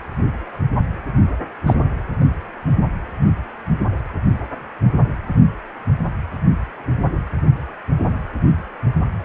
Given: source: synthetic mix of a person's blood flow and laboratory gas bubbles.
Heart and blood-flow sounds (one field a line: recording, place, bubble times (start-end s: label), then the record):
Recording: Doppler ultrasound of blood flow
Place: precordium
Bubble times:
1.66-1.75 s: bubbles
From the record:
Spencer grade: 1 (occasional bubble signal discernible with the cardiac motion signal, with majority of cardiac periods free of bubbles)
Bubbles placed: anywhere in the cardiac cycle